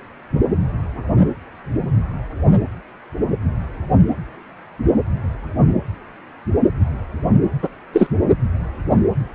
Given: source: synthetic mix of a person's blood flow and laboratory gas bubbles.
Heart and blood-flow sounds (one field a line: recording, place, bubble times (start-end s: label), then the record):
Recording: Doppler ultrasound of blood flow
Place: precordium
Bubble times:
7.62-7.69 s: bubbles
7.93-8.07 s: bubbles
From the record:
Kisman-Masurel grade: 213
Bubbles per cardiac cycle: several, 3 to 8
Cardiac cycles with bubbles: 1 to 10%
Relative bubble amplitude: loud (0.450 to 0.775)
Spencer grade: 1 (occasional bubble signal discernible with the cardiac motion signal, with majority of cardiac periods free of bubbles)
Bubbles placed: anywhere in the cardiac cycle